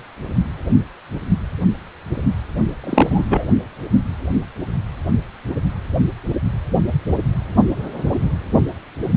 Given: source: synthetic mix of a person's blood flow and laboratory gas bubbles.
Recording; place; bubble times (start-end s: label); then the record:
Doppler ultrasound of blood flow; precordium
2.83-3.27 s: bubbles
3.30-3.51 s: bubbles
From the record:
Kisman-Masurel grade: 213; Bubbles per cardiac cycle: several, 3 to 8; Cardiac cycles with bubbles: 1 to 10%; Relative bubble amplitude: loud (0.450 to 0.775); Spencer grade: 1 (occasional bubble signal discernible with the cardiac motion signal, with majority of cardiac periods free of bubbles); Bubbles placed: only in the low amplitude regions of the cardiac cycle